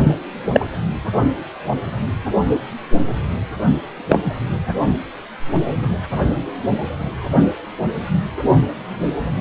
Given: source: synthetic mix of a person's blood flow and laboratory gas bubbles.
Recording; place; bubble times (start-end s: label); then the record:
Doppler ultrasound of blood flow; precordium
0.53-0.66 s: bubbles
4.08-4.20 s: bubbles
4.26-4.34 s: bubbles
From the record:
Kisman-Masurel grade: 123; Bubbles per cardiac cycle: 1 to 2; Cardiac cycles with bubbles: 10 to 50%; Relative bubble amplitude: loud (0.450 to 0.775); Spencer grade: 2 (many but less than half of the cardiac periods contain bubble signals, singularly or in groups); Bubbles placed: only in the low amplitude regions of the cardiac cycle